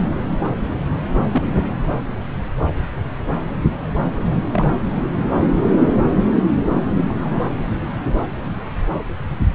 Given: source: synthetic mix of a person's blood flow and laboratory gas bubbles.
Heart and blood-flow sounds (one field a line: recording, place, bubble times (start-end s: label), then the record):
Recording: Doppler ultrasound of blood flow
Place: subclavian vein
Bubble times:
1.31-1.51 s: bubbles
1.54-1.61 s: bubbles
4.52-4.71 s: bubbles
7.10-7.14 s: bubbles
7.20-7.42 s: bubbles
From the record:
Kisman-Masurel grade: 122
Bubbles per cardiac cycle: 1 to 2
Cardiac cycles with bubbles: 10 to 50%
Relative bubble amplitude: moderate (0.250 to 0.450)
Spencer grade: 2 (many but less than half of the cardiac periods contain bubble signals, singularly or in groups)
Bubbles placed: anywhere in the cardiac cycle